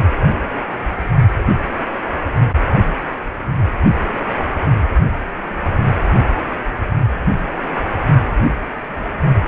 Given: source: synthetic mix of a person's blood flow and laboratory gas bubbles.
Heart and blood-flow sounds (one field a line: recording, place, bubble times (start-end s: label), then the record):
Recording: Doppler ultrasound of blood flow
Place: precordium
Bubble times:
no bubbles
From the record:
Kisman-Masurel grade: 000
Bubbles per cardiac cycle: 0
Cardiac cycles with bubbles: 0%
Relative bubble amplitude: no bubbles discernible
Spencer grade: 0 (complete lack of bubble signals)